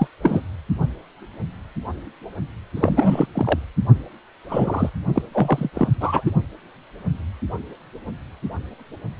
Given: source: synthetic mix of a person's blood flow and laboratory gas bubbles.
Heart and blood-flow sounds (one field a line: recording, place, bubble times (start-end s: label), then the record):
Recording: Doppler ultrasound of blood flow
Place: precordium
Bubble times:
0.00-0.07 s: bubbles
0.22-0.40 s: bubbles
2.76-3.26 s: bubbles
3.35-3.59 s: bubbles
4.49-4.90 s: bubbles
5.15-5.22 s: bubbles
5.32-5.70 s: bubbles
5.74-5.88 s: bubbles
6.00-6.31 s: bubbles
From the record:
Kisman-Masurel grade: 232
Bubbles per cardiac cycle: several, 3 to 8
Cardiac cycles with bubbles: 50 to 99%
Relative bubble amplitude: moderate (0.250 to 0.450)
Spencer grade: 3 (all of the cardiac periods contain showers or single bubble signals, but not dominating or overriding the cardiac motion signals)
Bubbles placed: only in the low amplitude regions of the cardiac cycle